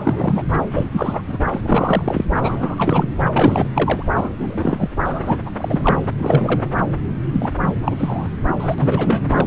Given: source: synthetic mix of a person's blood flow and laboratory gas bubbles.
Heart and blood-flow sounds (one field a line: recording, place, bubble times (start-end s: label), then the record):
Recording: Doppler ultrasound of blood flow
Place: subclavian vein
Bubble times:
0.00-0.43 s: bubbles
0.56-0.62 s: bubbles
0.70-0.86 s: bubbles
0.91-1.21 s: bubbles
1.27-1.38 s: bubbles
1.51-2.26 s: bubbles
2.39-3.08 s: bubbles
3.33-3.68 s: bubbles
3.74-4.03 s: bubbles
4.14-4.88 s: bubbles
5.04-5.39 s: bubbles
5.46-5.50 s: bubbles
5.58-5.98 s: bubbles
6.19-6.71 s: bubbles
7.32-7.51 s: bubbles
7.58-7.74 s: bubbles
7.80-8.28 s: bubbles
8.58-8.75 s: bubbles
8.78-9.23 s: bubbles
9.28-9.47 s: bubbles
From the record:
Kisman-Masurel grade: 343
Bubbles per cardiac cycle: rolling drumbeat, 9 or more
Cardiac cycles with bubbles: 100%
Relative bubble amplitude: loud (0.450 to 0.775)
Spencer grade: 3 (all of the cardiac periods contain showers or single bubble signals, but not dominating or overriding the cardiac motion signals)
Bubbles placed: anywhere in the cardiac cycle